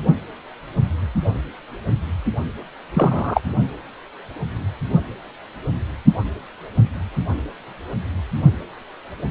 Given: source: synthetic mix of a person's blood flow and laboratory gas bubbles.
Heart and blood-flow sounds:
Doppler ultrasound of blood flow; precordium
2.94-3.42 s: bubbles
From the record:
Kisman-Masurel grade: 113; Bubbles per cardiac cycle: 1 to 2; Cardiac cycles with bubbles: 1 to 10%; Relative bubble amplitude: loud (0.450 to 0.775); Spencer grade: 1 (occasional bubble signal discernible with the cardiac motion signal, with majority of cardiac periods free of bubbles); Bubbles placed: only in the low amplitude regions of the cardiac cycle

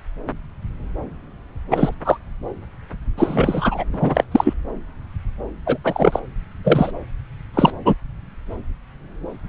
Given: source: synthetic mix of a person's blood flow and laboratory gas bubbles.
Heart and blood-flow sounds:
Doppler ultrasound of blood flow; subclavian vein
1.70-1.94 s: bubbles
2.04-2.17 s: bubbles
3.17-3.84 s: bubbles
3.93-4.24 s: bubbles
4.32-4.54 s: bubbles
5.66-5.78 s: bubbles
5.83-6.20 s: bubbles
6.64-6.92 s: bubbles
7.54-7.72 s: bubbles
7.85-7.94 s: bubbles
From the record:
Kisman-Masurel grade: 223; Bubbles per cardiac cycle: several, 3 to 8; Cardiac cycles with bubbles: 10 to 50%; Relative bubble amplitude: loud (0.450 to 0.775); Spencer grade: 2 (many but less than half of the cardiac periods contain bubble signals, singularly or in groups); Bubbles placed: anywhere in the cardiac cycle

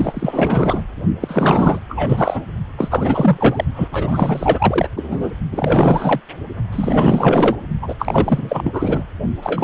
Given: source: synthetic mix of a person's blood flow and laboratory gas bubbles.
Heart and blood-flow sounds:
Doppler ultrasound of blood flow; precordium
0.00-0.84 s: bubbles
1.20-1.81 s: bubbles
1.89-2.43 s: bubbles
2.77-3.65 s: bubbles
3.75-3.88 s: bubbles
3.91-4.88 s: bubbles
4.96-5.32 s: bubbles
5.51-6.20 s: bubbles
6.72-7.57 s: bubbles
7.82-7.95 s: bubbles
7.99-9.03 s: bubbles
9.42-9.64 s: bubbles
From the record:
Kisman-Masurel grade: 444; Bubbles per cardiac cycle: continuous sound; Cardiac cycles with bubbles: 100%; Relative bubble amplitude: maximal (0.775 to 0.999); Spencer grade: 4 (maximum detectable bubble signal sounding continuously throughout systole and diastole of every cardiac period, and overriding the amplitude of the normal cardiac signals); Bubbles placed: only in the low amplitude regions of the cardiac cycle

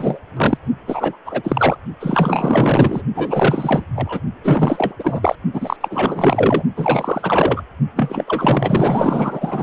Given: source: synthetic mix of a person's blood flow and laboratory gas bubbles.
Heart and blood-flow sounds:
Doppler ultrasound of blood flow; precordium
0.00-0.19 s: bubbles
0.36-0.57 s: bubbles
0.86-1.18 s: bubbles
1.25-1.78 s: bubbles
1.99-3.02 s: bubbles
3.15-3.84 s: bubbles
3.96-4.21 s: bubbles
4.43-4.94 s: bubbles
4.99-5.35 s: bubbles
5.53-5.76 s: bubbles
5.80-6.62 s: bubbles
6.76-7.63 s: bubbles
7.95-9.63 s: bubbles
From the record:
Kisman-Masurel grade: 444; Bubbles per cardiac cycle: continuous sound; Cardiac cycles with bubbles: 100%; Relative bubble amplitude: maximal (0.775 to 0.999); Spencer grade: 4 (maximum detectable bubble signal sounding continuously throughout systole and diastole of every cardiac period, and overriding the amplitude of the normal cardiac signals); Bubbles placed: only in the low amplitude regions of the cardiac cycle

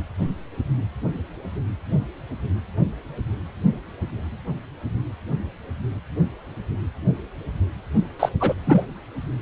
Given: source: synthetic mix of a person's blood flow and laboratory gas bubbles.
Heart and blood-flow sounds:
Doppler ultrasound of blood flow; precordium
8.19-8.29 s: bubbles
8.39-8.54 s: bubbles
8.66-8.81 s: bubbles
From the record:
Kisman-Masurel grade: 213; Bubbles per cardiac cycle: several, 3 to 8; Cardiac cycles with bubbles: 1 to 10%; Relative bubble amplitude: loud (0.450 to 0.775); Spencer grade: 1 (occasional bubble signal discernible with the cardiac motion signal, with majority of cardiac periods free of bubbles); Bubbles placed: only in the low amplitude regions of the cardiac cycle

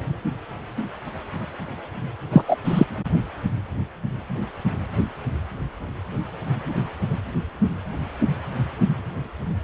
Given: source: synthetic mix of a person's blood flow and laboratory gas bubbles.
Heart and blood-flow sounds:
Doppler ultrasound of blood flow; precordium
2.32-2.42 s: bubbles
2.48-2.56 s: bubbles
2.64-2.85 s: bubbles
From the record:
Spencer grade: 1 (occasional bubble signal discernible with the cardiac motion signal, with majority of cardiac periods free of bubbles); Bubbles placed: only in the low amplitude regions of the cardiac cycle

